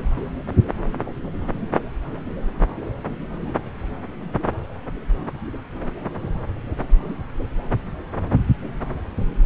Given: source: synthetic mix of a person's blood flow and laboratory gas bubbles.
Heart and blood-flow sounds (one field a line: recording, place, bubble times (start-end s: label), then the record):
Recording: Doppler ultrasound of blood flow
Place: subclavian vein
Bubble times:
no bubbles
From the record:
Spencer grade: 0 (complete lack of bubble signals)